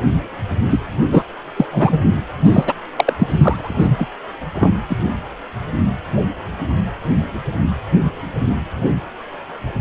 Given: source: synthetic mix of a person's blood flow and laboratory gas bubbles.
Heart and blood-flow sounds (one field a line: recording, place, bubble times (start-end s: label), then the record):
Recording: Doppler ultrasound of blood flow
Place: precordium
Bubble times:
0.71-0.82 s: bubbles
1.11-1.24 s: bubbles
1.56-1.66 s: bubbles
1.71-1.98 s: bubbles
2.44-2.73 s: bubbles
2.96-3.13 s: bubbles
3.19-4.07 s: bubbles
4.54-4.70 s: bubbles
4.90-4.97 s: bubbles
From the record:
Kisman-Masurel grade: 223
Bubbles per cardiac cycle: several, 3 to 8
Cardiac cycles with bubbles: 10 to 50%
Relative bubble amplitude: loud (0.450 to 0.775)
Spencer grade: 2 (many but less than half of the cardiac periods contain bubble signals, singularly or in groups)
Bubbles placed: anywhere in the cardiac cycle